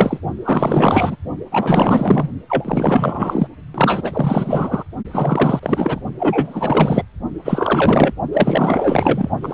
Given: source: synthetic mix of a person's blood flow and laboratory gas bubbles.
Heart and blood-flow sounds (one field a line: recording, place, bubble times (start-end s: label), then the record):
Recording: Doppler ultrasound of blood flow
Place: precordium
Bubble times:
0.00-0.20 s: bubbles
0.45-1.16 s: bubbles
1.51-2.29 s: bubbles
2.49-3.48 s: bubbles
3.74-4.85 s: bubbles
5.11-5.59 s: bubbles
5.62-6.01 s: bubbles
6.18-7.03 s: bubbles
7.44-8.14 s: bubbles
8.32-9.30 s: bubbles
9.41-9.54 s: bubbles
From the record:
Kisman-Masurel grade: 444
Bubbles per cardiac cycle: continuous sound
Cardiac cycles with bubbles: 100%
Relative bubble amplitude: maximal (0.775 to 0.999)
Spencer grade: 4 (maximum detectable bubble signal sounding continuously throughout systole and diastole of every cardiac period, and overriding the amplitude of the normal cardiac signals)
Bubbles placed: only in the low amplitude regions of the cardiac cycle